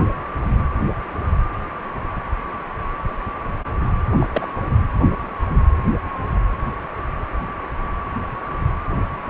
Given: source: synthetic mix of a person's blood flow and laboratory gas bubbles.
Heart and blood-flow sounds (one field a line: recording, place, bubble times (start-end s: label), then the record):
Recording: Doppler ultrasound of blood flow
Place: precordium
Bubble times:
4.19-4.26 s: bubbles
4.34-4.47 s: bubbles
From the record:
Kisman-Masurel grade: 212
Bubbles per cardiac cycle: several, 3 to 8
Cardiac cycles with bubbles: 1 to 10%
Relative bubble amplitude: moderate (0.250 to 0.450)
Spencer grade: 1 (occasional bubble signal discernible with the cardiac motion signal, with majority of cardiac periods free of bubbles)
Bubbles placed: anywhere in the cardiac cycle